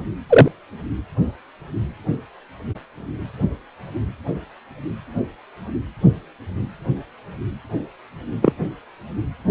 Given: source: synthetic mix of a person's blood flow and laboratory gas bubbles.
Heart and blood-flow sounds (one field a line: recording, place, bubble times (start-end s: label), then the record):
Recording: Doppler ultrasound of blood flow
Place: precordium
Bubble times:
0.29-0.48 s: bubbles
8.42-8.53 s: bubbles
From the record:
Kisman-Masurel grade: 123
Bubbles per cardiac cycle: 1 to 2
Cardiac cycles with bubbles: 10 to 50%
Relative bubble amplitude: loud (0.450 to 0.775)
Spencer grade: 2 (many but less than half of the cardiac periods contain bubble signals, singularly or in groups)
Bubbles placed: anywhere in the cardiac cycle